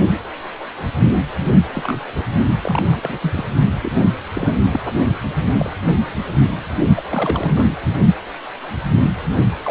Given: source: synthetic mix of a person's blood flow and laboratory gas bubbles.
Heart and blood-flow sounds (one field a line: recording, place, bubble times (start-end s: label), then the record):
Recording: Doppler ultrasound of blood flow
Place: precordium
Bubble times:
1.74-2.05 s: bubbles
2.15-2.24 s: bubbles
2.61-3.19 s: bubbles
3.22-3.44 s: bubbles
3.82-4.09 s: bubbles
4.34-4.56 s: bubbles
4.72-4.79 s: bubbles
5.40-5.48 s: bubbles
5.58-5.70 s: bubbles
6.96-7.03 s: bubbles
7.10-7.75 s: bubbles
9.64-9.71 s: bubbles
From the record:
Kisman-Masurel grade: 232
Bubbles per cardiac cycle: several, 3 to 8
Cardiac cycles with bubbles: 50 to 99%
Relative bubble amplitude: moderate (0.250 to 0.450)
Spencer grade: 3 (all of the cardiac periods contain showers or single bubble signals, but not dominating or overriding the cardiac motion signals)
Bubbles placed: only in the low amplitude regions of the cardiac cycle